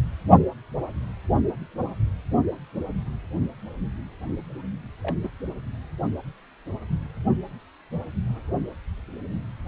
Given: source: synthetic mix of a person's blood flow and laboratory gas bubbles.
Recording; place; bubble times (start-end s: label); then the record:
Doppler ultrasound of blood flow; precordium
5.02-5.17 s: bubbles
5.21-5.30 s: bubbles
From the record:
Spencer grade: 1 (occasional bubble signal discernible with the cardiac motion signal, with majority of cardiac periods free of bubbles); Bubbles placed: only in the low amplitude regions of the cardiac cycle